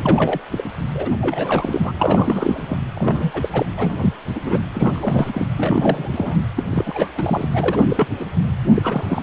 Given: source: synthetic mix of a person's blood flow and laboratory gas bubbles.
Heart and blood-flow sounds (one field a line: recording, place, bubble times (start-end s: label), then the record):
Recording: Doppler ultrasound of blood flow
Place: precordium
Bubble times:
0.00-0.41 s: bubbles
0.52-0.70 s: bubbles
0.94-1.15 s: bubbles
1.21-1.92 s: bubbles
1.94-2.77 s: bubbles
2.95-3.31 s: bubbles
3.33-3.49 s: bubbles
3.52-3.66 s: bubbles
3.77-4.13 s: bubbles
4.35-4.40 s: bubbles
4.45-4.64 s: bubbles
4.71-5.32 s: bubbles
5.34-5.46 s: bubbles
5.58-6.09 s: bubbles
6.12-6.40 s: bubbles
6.56-6.63 s: bubbles
6.70-7.48 s: bubbles
7.54-8.07 s: bubbles
8.19-8.25 s: bubbles
8.74-9.06 s: bubbles
9.09-9.22 s: bubbles
From the record:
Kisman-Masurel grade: 342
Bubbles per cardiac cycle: rolling drumbeat, 9 or more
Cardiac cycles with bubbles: 100%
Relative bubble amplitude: moderate (0.250 to 0.450)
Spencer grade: 3 (all of the cardiac periods contain showers or single bubble signals, but not dominating or overriding the cardiac motion signals)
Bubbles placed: anywhere in the cardiac cycle